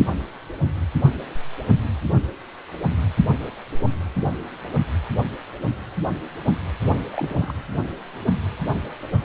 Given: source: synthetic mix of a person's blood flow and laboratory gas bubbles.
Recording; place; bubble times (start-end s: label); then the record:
Doppler ultrasound of blood flow; precordium
6.82-7.09 s: bubbles
7.13-7.54 s: bubbles
From the record:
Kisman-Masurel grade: 211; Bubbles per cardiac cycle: several, 3 to 8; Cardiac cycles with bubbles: 1 to 10%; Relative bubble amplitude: barely perceptible (0.100 to 0.250); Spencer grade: 1 (occasional bubble signal discernible with the cardiac motion signal, with majority of cardiac periods free of bubbles); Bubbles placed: anywhere in the cardiac cycle